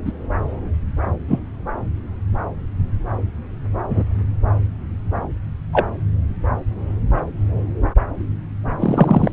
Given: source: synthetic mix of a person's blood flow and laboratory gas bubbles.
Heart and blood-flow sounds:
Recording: Doppler ultrasound of blood flow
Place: subclavian vein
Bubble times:
0.05-0.12 s: bubbles
1.28-1.39 s: bubbles
3.90-4.03 s: bubbles
5.72-5.86 s: bubbles
8.79-9.32 s: bubbles
From the record:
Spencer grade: 2 (many but less than half of the cardiac periods contain bubble signals, singularly or in groups)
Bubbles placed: anywhere in the cardiac cycle

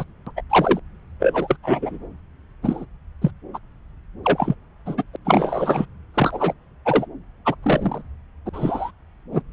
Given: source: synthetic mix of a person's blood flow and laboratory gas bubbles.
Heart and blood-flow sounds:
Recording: Doppler ultrasound of blood flow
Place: subclavian vein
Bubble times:
0.00-0.04 s: bubbles
0.26-0.30 s: bubbles
0.36-0.41 s: bubbles
0.49-0.79 s: bubbles
1.20-1.56 s: bubbles
1.63-1.98 s: bubbles
2.62-2.85 s: bubbles
3.21-3.31 s: bubbles
3.54-3.58 s: bubbles
4.24-4.55 s: bubbles
4.86-5.04 s: bubbles
5.14-5.16 s: bubbles
5.25-5.86 s: bubbles
6.14-6.53 s: bubbles
6.85-7.06 s: bubbles
7.45-7.55 s: bubbles
7.62-8.02 s: bubbles
8.46-8.50 s: bubbles
8.53-8.91 s: bubbles
9.32-9.42 s: bubbles
From the record:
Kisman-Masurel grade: 242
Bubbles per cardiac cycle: several, 3 to 8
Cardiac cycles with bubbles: 100%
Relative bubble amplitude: moderate (0.250 to 0.450)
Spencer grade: 3 (all of the cardiac periods contain showers or single bubble signals, but not dominating or overriding the cardiac motion signals)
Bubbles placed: anywhere in the cardiac cycle

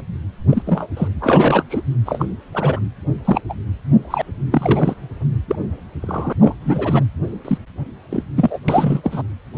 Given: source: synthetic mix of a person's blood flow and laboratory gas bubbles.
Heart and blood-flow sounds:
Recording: Doppler ultrasound of blood flow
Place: precordium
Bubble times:
0.49-0.62 s: bubbles
0.66-0.89 s: bubbles
0.96-1.08 s: bubbles
1.21-1.63 s: bubbles
1.70-1.81 s: bubbles
2.06-2.25 s: bubbles
2.52-2.80 s: bubbles
3.25-3.41 s: bubbles
3.49-3.54 s: bubbles
4.00-4.22 s: bubbles
4.51-4.95 s: bubbles
5.48-5.56 s: bubbles
6.02-6.33 s: bubbles
6.40-6.54 s: bubbles
6.61-7.04 s: bubbles
7.45-7.58 s: bubbles
8.10-8.23 s: bubbles
8.36-8.59 s: bubbles
8.68-9.01 s: bubbles
9.04-9.22 s: bubbles
9.54-9.58 s: bubbles
From the record:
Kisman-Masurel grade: 243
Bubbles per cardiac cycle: several, 3 to 8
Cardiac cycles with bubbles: 100%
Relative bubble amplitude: loud (0.450 to 0.775)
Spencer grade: 3 (all of the cardiac periods contain showers or single bubble signals, but not dominating or overriding the cardiac motion signals)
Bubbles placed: anywhere in the cardiac cycle

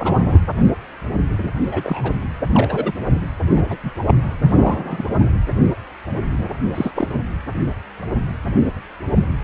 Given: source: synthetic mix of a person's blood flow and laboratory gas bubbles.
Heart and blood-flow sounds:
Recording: Doppler ultrasound of blood flow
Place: precordium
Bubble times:
0.00-0.40 s: bubbles
1.71-2.14 s: bubbles
2.52-2.93 s: bubbles
3.54-3.77 s: bubbles
3.83-3.92 s: bubbles
4.07-4.14 s: bubbles
4.45-4.53 s: bubbles
4.55-5.09 s: bubbles
6.70-6.91 s: bubbles
6.95-7.08 s: bubbles
From the record:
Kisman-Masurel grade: 232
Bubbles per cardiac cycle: several, 3 to 8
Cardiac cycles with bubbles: 50 to 99%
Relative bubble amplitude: moderate (0.250 to 0.450)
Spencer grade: 3 (all of the cardiac periods contain showers or single bubble signals, but not dominating or overriding the cardiac motion signals)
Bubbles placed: anywhere in the cardiac cycle

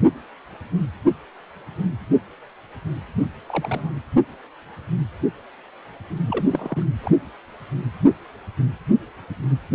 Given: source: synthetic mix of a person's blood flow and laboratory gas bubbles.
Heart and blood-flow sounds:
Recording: Doppler ultrasound of blood flow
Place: precordium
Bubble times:
3.47-3.93 s: bubbles
6.27-6.44 s: bubbles
6.50-6.83 s: bubbles
7.03-7.11 s: bubbles
From the record:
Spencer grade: 2 (many but less than half of the cardiac periods contain bubble signals, singularly or in groups)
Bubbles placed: anywhere in the cardiac cycle

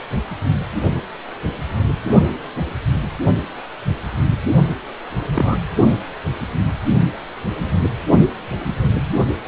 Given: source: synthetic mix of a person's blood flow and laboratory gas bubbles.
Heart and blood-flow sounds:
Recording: Doppler ultrasound of blood flow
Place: precordium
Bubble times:
5.34-5.57 s: bubbles
From the record:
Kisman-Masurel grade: 122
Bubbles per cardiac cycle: 1 to 2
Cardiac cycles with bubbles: 10 to 50%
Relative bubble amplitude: moderate (0.250 to 0.450)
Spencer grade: 2 (many but less than half of the cardiac periods contain bubble signals, singularly or in groups)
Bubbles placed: only in the low amplitude regions of the cardiac cycle

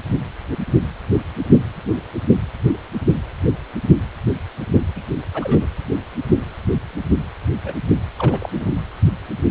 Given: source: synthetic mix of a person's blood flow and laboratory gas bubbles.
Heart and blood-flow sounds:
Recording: Doppler ultrasound of blood flow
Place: precordium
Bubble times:
4.96-5.01 s: bubbles
5.34-5.67 s: bubbles
7.64-7.73 s: bubbles
8.19-8.49 s: bubbles
8.52-8.71 s: bubbles
From the record:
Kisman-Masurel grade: 221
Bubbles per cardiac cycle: several, 3 to 8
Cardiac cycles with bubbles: 10 to 50%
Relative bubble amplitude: barely perceptible (0.100 to 0.250)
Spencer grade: 2 (many but less than half of the cardiac periods contain bubble signals, singularly or in groups)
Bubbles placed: anywhere in the cardiac cycle

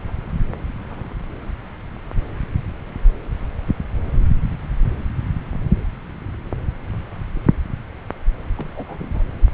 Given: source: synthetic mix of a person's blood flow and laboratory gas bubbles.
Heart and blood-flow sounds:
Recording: Doppler ultrasound of blood flow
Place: subclavian vein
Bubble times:
8.57-9.23 s: bubbles
From the record:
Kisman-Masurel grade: 211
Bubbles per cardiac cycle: several, 3 to 8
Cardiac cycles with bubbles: 1 to 10%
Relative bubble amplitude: barely perceptible (0.100 to 0.250)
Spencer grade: 1 (occasional bubble signal discernible with the cardiac motion signal, with majority of cardiac periods free of bubbles)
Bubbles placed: anywhere in the cardiac cycle

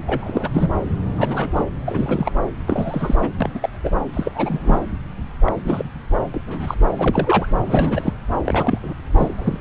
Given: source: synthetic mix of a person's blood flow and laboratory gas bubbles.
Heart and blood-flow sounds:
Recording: Doppler ultrasound of blood flow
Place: subclavian vein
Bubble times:
0.06-0.48 s: bubbles
0.53-0.68 s: bubbles
1.17-1.49 s: bubbles
1.56-1.64 s: bubbles
1.85-2.32 s: bubbles
2.68-3.16 s: bubbles
3.20-3.31 s: bubbles
3.41-3.50 s: bubbles
3.54-3.69 s: bubbles
3.83-3.90 s: bubbles
4.13-4.81 s: bubbles
5.45-5.53 s: bubbles
5.64-5.84 s: bubbles
6.34-6.41 s: bubbles
6.47-6.75 s: bubbles
6.99-7.48 s: bubbles
7.62-8.13 s: bubbles
8.45-8.79 s: bubbles
8.82-8.94 s: bubbles
9.18-9.35 s: bubbles
9.38-9.58 s: bubbles
From the record:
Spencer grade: 3 (all of the cardiac periods contain showers or single bubble signals, but not dominating or overriding the cardiac motion signals)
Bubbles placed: anywhere in the cardiac cycle

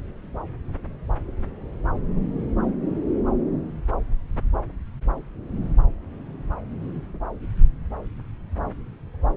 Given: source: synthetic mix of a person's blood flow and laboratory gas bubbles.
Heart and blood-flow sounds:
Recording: Doppler ultrasound of blood flow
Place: subclavian vein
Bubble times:
no bubbles
From the record:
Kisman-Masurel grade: 000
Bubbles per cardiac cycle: 0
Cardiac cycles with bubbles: 0%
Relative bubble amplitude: no bubbles discernible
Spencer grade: 0 (complete lack of bubble signals)

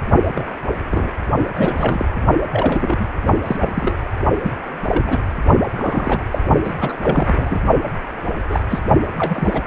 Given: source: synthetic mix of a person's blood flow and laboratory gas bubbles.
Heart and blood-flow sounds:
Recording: Doppler ultrasound of blood flow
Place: precordium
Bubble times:
0.36-0.44 s: bubbles
0.90-1.11 s: bubbles
1.57-2.06 s: bubbles
2.52-3.08 s: bubbles
3.46-3.56 s: bubbles
3.60-4.12 s: bubbles
4.43-4.51 s: bubbles
4.88-5.24 s: bubbles
5.72-6.21 s: bubbles
6.31-6.38 s: bubbles
6.63-6.73 s: bubbles
6.80-6.97 s: bubbles
7.02-7.60 s: bubbles
8.50-8.60 s: bubbles
8.70-8.79 s: bubbles
9.18-9.62 s: bubbles
From the record:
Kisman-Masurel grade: 242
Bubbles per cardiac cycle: several, 3 to 8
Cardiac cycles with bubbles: 100%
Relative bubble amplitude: moderate (0.250 to 0.450)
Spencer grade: 3 (all of the cardiac periods contain showers or single bubble signals, but not dominating or overriding the cardiac motion signals)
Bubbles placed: only in the low amplitude regions of the cardiac cycle

